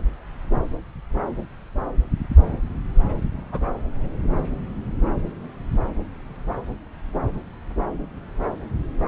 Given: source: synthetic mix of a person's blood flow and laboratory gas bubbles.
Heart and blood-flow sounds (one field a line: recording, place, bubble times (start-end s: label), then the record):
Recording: Doppler ultrasound of blood flow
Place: subclavian vein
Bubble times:
3.52-3.59 s: bubbles
From the record:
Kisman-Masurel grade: 122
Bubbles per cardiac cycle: 1 to 2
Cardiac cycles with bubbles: 10 to 50%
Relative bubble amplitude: moderate (0.250 to 0.450)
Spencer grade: 2 (many but less than half of the cardiac periods contain bubble signals, singularly or in groups)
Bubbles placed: anywhere in the cardiac cycle